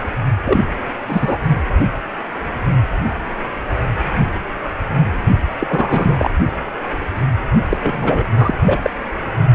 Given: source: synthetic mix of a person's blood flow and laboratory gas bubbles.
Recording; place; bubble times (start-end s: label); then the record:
Doppler ultrasound of blood flow; precordium
0.46-0.60 s: bubbles
1.07-1.36 s: bubbles
5.59-6.30 s: bubbles
7.66-7.77 s: bubbles
7.82-8.23 s: bubbles
8.37-8.54 s: bubbles
8.65-8.79 s: bubbles
8.82-8.90 s: bubbles
From the record:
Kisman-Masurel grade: 223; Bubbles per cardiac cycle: several, 3 to 8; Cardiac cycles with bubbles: 10 to 50%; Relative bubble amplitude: loud (0.450 to 0.775); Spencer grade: 2 (many but less than half of the cardiac periods contain bubble signals, singularly or in groups); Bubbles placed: only in the low amplitude regions of the cardiac cycle